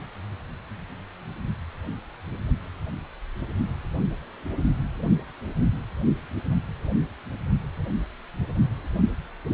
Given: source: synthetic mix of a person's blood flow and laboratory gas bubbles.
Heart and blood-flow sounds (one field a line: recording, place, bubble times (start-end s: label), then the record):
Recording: Doppler ultrasound of blood flow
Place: precordium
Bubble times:
no bubbles
From the record:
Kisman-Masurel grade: 000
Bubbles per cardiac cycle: 0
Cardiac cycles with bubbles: 0%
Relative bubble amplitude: no bubbles discernible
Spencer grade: 0 (complete lack of bubble signals)